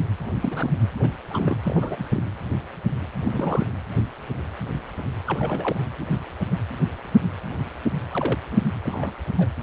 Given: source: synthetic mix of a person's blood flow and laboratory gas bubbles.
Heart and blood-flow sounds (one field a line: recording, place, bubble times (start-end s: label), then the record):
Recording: Doppler ultrasound of blood flow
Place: precordium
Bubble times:
0.23-0.33 s: bubbles
0.36-0.71 s: bubbles
0.98-1.10 s: bubbles
1.30-1.56 s: bubbles
1.63-2.06 s: bubbles
2.11-2.23 s: bubbles
3.23-3.67 s: bubbles
5.26-5.80 s: bubbles
8.12-8.38 s: bubbles
8.52-8.59 s: bubbles
8.84-9.12 s: bubbles
9.38-9.48 s: bubbles
From the record:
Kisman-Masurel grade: 221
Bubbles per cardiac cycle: several, 3 to 8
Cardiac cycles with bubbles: 10 to 50%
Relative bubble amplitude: barely perceptible (0.100 to 0.250)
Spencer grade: 2 (many but less than half of the cardiac periods contain bubble signals, singularly or in groups)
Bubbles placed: anywhere in the cardiac cycle